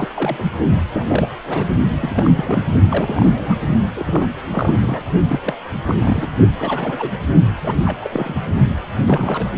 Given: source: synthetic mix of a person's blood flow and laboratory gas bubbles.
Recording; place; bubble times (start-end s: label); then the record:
Doppler ultrasound of blood flow; precordium
0.00-0.09 s: bubbles
0.14-0.43 s: bubbles
0.93-1.05 s: bubbles
1.07-1.29 s: bubbles
1.46-1.66 s: bubbles
1.91-1.97 s: bubbles
1.99-2.31 s: bubbles
2.35-2.62 s: bubbles
2.91-3.60 s: bubbles
3.94-4.27 s: bubbles
4.50-5.01 s: bubbles
5.28-5.40 s: bubbles
5.44-5.54 s: bubbles
5.86-6.31 s: bubbles
6.58-7.20 s: bubbles
7.57-7.82 s: bubbles
7.85-7.99 s: bubbles
8.04-8.41 s: bubbles
9.06-9.52 s: bubbles
From the record:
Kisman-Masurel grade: 342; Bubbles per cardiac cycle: rolling drumbeat, 9 or more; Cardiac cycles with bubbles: 100%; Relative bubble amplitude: moderate (0.250 to 0.450); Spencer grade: 3 (all of the cardiac periods contain showers or single bubble signals, but not dominating or overriding the cardiac motion signals); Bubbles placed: only in the low amplitude regions of the cardiac cycle